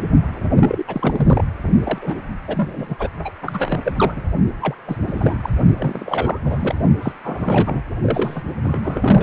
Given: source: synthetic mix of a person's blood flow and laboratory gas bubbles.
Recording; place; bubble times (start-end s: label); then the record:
Doppler ultrasound of blood flow; precordium
0.00-0.04 s: bubbles
0.58-0.83 s: bubbles
0.87-1.44 s: bubbles
1.83-1.98 s: bubbles
2.02-2.21 s: bubbles
2.48-3.09 s: bubbles
3.24-3.32 s: bubbles
3.42-3.81 s: bubbles
3.84-3.92 s: bubbles
3.96-4.23 s: bubbles
4.61-4.75 s: bubbles
4.87-4.97 s: bubbles
5.04-5.50 s: bubbles
5.78-6.40 s: bubbles
6.44-6.75 s: bubbles
7.02-7.12 s: bubbles
7.24-7.83 s: bubbles
8.02-8.42 s: bubbles
8.63-9.23 s: bubbles
From the record:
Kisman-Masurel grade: 342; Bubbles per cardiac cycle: rolling drumbeat, 9 or more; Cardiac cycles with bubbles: 100%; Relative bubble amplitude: moderate (0.250 to 0.450); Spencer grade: 3 (all of the cardiac periods contain showers or single bubble signals, but not dominating or overriding the cardiac motion signals); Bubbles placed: only in the low amplitude regions of the cardiac cycle